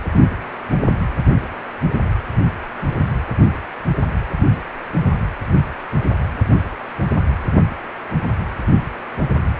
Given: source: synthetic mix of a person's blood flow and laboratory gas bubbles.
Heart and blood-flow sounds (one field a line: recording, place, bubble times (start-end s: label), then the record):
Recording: Doppler ultrasound of blood flow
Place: precordium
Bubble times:
no bubbles
From the record:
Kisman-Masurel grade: 000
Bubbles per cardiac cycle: 0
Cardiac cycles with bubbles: 0%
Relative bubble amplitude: no bubbles discernible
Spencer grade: 0 (complete lack of bubble signals)